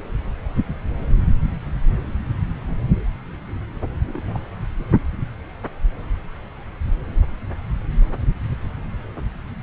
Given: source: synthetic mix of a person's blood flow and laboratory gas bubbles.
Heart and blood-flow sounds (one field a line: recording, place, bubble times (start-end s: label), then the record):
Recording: Doppler ultrasound of blood flow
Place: subclavian vein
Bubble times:
4.04-4.40 s: bubbles
From the record:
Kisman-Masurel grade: 211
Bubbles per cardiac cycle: several, 3 to 8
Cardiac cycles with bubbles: 1 to 10%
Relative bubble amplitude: barely perceptible (0.100 to 0.250)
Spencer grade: 1 (occasional bubble signal discernible with the cardiac motion signal, with majority of cardiac periods free of bubbles)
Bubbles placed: anywhere in the cardiac cycle